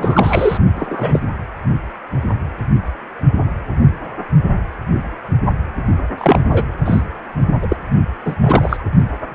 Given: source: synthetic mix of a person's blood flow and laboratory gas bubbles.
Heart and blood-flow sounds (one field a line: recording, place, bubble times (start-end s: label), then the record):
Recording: Doppler ultrasound of blood flow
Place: precordium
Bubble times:
0.00-0.57 s: bubbles
0.76-1.21 s: bubbles
6.17-6.41 s: bubbles
6.52-6.64 s: bubbles
6.85-7.02 s: bubbles
7.62-7.76 s: bubbles
8.24-8.35 s: bubbles
8.41-8.77 s: bubbles
From the record:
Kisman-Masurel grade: 233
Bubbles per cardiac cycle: several, 3 to 8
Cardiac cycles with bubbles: 50 to 99%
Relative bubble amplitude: loud (0.450 to 0.775)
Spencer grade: 3 (all of the cardiac periods contain showers or single bubble signals, but not dominating or overriding the cardiac motion signals)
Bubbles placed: only in the low amplitude regions of the cardiac cycle